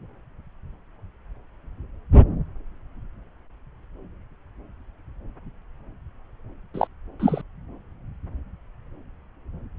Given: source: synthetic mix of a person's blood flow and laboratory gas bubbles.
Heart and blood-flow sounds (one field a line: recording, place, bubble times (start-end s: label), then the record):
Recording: Doppler ultrasound of blood flow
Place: subclavian vein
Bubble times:
6.74-6.87 s: bubbles
7.20-7.42 s: bubbles
From the record:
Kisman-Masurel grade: 123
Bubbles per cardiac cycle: 1 to 2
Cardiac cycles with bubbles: 10 to 50%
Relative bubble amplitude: loud (0.450 to 0.775)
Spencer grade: 2 (many but less than half of the cardiac periods contain bubble signals, singularly or in groups)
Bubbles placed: anywhere in the cardiac cycle